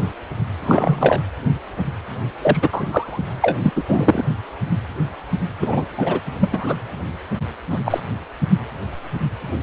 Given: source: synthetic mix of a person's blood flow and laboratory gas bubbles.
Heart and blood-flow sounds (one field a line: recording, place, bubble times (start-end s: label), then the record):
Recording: Doppler ultrasound of blood flow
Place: precordium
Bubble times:
0.64-1.20 s: bubbles
2.41-2.59 s: bubbles
2.61-2.69 s: bubbles
2.72-3.23 s: bubbles
3.41-3.57 s: bubbles
3.62-3.73 s: bubbles
3.75-3.83 s: bubbles
3.87-4.24 s: bubbles
5.62-5.85 s: bubbles
5.97-6.21 s: bubbles
6.41-6.75 s: bubbles
7.70-7.80 s: bubbles
7.85-8.00 s: bubbles
From the record:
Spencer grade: 2 (many but less than half of the cardiac periods contain bubble signals, singularly or in groups)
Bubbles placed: anywhere in the cardiac cycle